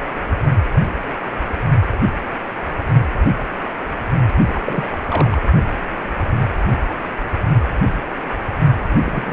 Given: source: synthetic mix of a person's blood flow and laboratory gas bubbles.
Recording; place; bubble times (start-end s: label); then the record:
Doppler ultrasound of blood flow; precordium
4.47-4.61 s: bubbles
4.65-4.91 s: bubbles
5.02-5.42 s: bubbles
9.03-9.33 s: bubbles
From the record:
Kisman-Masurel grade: 222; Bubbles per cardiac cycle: several, 3 to 8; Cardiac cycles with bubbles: 10 to 50%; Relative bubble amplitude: moderate (0.250 to 0.450); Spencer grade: 2 (many but less than half of the cardiac periods contain bubble signals, singularly or in groups); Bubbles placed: only in the low amplitude regions of the cardiac cycle